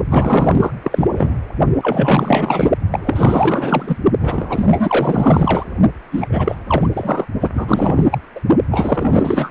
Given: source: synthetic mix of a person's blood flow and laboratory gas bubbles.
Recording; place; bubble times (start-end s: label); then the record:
Doppler ultrasound of blood flow; precordium
0.10-0.71 s: bubbles
0.83-1.07 s: bubbles
1.15-1.34 s: bubbles
1.82-2.69 s: bubbles
2.91-3.97 s: bubbles
4.19-4.66 s: bubbles
4.70-5.66 s: bubbles
6.11-6.28 s: bubbles
6.31-6.55 s: bubbles
6.68-6.88 s: bubbles
6.93-7.26 s: bubbles
7.40-7.50 s: bubbles
7.54-8.18 s: bubbles
8.36-8.40 s: bubbles
8.71-9.51 s: bubbles
From the record:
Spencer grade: 4 (maximum detectable bubble signal sounding continuously throughout systole and diastole of every cardiac period, and overriding the amplitude of the normal cardiac signals); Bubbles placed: only in the low amplitude regions of the cardiac cycle